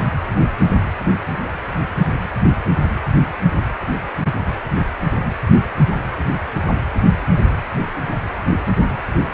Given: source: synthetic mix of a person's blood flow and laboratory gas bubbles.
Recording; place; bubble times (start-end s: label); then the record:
Doppler ultrasound of blood flow; precordium
no bubbles
From the record:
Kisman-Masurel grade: 000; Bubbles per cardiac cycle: 0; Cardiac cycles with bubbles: 0%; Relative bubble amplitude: no bubbles discernible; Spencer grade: 0 (complete lack of bubble signals)